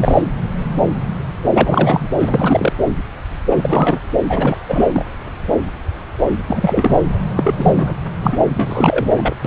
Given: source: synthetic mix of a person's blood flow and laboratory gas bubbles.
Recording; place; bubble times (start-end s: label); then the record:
Doppler ultrasound of blood flow; subclavian vein
0.00-0.21 s: bubbles
1.54-2.06 s: bubbles
2.19-2.73 s: bubbles
3.50-3.99 s: bubbles
4.29-4.58 s: bubbles
4.69-5.04 s: bubbles
6.48-7.03 s: bubbles
7.36-7.54 s: bubbles
7.57-7.95 s: bubbles
8.22-8.38 s: bubbles
8.56-9.34 s: bubbles
9.45-9.47 s: bubbles
From the record:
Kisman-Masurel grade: 333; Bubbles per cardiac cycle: rolling drumbeat, 9 or more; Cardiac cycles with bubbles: 50 to 99%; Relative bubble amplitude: loud (0.450 to 0.775); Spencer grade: 3 (all of the cardiac periods contain showers or single bubble signals, but not dominating or overriding the cardiac motion signals); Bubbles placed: anywhere in the cardiac cycle